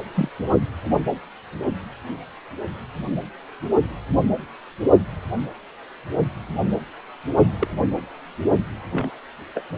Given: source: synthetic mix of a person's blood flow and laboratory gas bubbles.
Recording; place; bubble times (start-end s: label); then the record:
Doppler ultrasound of blood flow; precordium
0.14-0.29 s: bubbles
7.60-7.68 s: bubbles
8.91-9.10 s: bubbles
9.54-9.62 s: bubbles
From the record:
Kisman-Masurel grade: 122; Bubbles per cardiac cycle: 1 to 2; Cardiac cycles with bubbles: 10 to 50%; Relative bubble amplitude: moderate (0.250 to 0.450); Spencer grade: 2 (many but less than half of the cardiac periods contain bubble signals, singularly or in groups); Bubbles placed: only in the low amplitude regions of the cardiac cycle